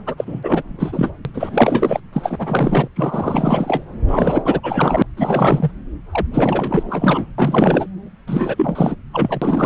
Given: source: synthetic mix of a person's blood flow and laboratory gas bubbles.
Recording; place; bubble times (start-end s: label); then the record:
Doppler ultrasound of blood flow; subclavian vein
0.06-1.13 s: bubbles
1.25-1.30 s: bubbles
1.33-2.00 s: bubbles
2.12-2.88 s: bubbles
2.96-3.84 s: bubbles
4.08-5.03 s: bubbles
5.17-5.71 s: bubbles
6.12-6.26 s: bubbles
6.31-7.25 s: bubbles
7.38-7.86 s: bubbles
8.27-8.96 s: bubbles
9.12-9.66 s: bubbles
From the record:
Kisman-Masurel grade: 444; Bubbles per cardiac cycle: continuous sound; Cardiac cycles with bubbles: 100%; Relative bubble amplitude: maximal (0.775 to 0.999); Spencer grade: 4 (maximum detectable bubble signal sounding continuously throughout systole and diastole of every cardiac period, and overriding the amplitude of the normal cardiac signals); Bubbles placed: anywhere in the cardiac cycle